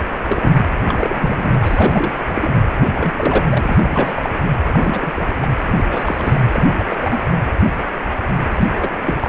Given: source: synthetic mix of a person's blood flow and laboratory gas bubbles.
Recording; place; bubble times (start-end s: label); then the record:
Doppler ultrasound of blood flow; precordium
0.28-0.52 s: bubbles
0.54-0.66 s: bubbles
0.74-0.76 s: bubbles
0.86-1.52 s: bubbles
1.59-2.30 s: bubbles
2.33-2.50 s: bubbles
2.80-2.88 s: bubbles
2.94-4.32 s: bubbles
4.73-5.12 s: bubbles
5.16-5.33 s: bubbles
5.41-5.50 s: bubbles
5.67-5.73 s: bubbles
5.78-5.85 s: bubbles
5.90-6.42 s: bubbles
6.53-6.99 s: bubbles
7.02-7.20 s: bubbles
8.54-8.67 s: bubbles
8.73-9.29 s: bubbles
From the record:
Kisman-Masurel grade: 332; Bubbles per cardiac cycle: rolling drumbeat, 9 or more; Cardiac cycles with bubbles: 50 to 99%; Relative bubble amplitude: moderate (0.250 to 0.450); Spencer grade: 3 (all of the cardiac periods contain showers or single bubble signals, but not dominating or overriding the cardiac motion signals); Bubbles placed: anywhere in the cardiac cycle